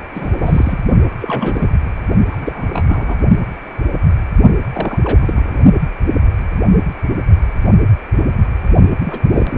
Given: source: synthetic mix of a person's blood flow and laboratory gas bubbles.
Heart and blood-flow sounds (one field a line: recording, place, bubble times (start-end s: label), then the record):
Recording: Doppler ultrasound of blood flow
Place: precordium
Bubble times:
0.15-0.37 s: bubbles
0.40-0.79 s: bubbles
1.21-1.69 s: bubbles
2.31-3.17 s: bubbles
4.73-4.98 s: bubbles
5.04-5.17 s: bubbles
5.21-5.59 s: bubbles
9.04-9.23 s: bubbles
9.32-9.58 s: bubbles
From the record:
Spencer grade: 3 (all of the cardiac periods contain showers or single bubble signals, but not dominating or overriding the cardiac motion signals)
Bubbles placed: only in the low amplitude regions of the cardiac cycle